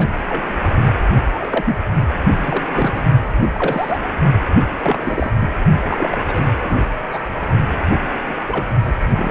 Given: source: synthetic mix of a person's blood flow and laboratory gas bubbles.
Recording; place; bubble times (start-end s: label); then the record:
Doppler ultrasound of blood flow; precordium
0.00-0.07 s: bubbles
0.28-0.43 s: bubbles
1.13-1.19 s: bubbles
1.30-1.78 s: bubbles
2.43-2.65 s: bubbles
2.74-3.06 s: bubbles
3.42-3.50 s: bubbles
3.53-3.99 s: bubbles
4.79-5.32 s: bubbles
5.40-5.50 s: bubbles
5.88-6.17 s: bubbles
6.26-6.46 s: bubbles
6.54-6.88 s: bubbles
7.00-7.21 s: bubbles
7.89-8.07 s: bubbles
8.29-8.34 s: bubbles
8.47-8.67 s: bubbles
8.84-8.94 s: bubbles
9.15-9.31 s: bubbles
From the record:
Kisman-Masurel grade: 242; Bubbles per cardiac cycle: several, 3 to 8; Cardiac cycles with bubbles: 100%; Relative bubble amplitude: moderate (0.250 to 0.450); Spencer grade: 3 (all of the cardiac periods contain showers or single bubble signals, but not dominating or overriding the cardiac motion signals); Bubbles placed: only in the low amplitude regions of the cardiac cycle